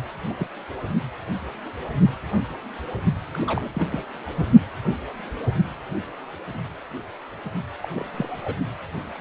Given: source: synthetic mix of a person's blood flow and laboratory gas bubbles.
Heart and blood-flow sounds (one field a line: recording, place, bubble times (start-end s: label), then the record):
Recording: Doppler ultrasound of blood flow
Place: precordium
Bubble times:
0.29-0.34 s: bubbles
0.37-0.48 s: bubbles
3.35-3.38 s: bubbles
3.42-3.70 s: bubbles
3.73-3.85 s: bubbles
3.90-4.03 s: bubbles
4.25-4.46 s: bubbles
7.82-8.54 s: bubbles
From the record:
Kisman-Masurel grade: 221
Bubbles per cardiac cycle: several, 3 to 8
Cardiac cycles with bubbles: 10 to 50%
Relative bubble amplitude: barely perceptible (0.100 to 0.250)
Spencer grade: 2 (many but less than half of the cardiac periods contain bubble signals, singularly or in groups)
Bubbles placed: only in the low amplitude regions of the cardiac cycle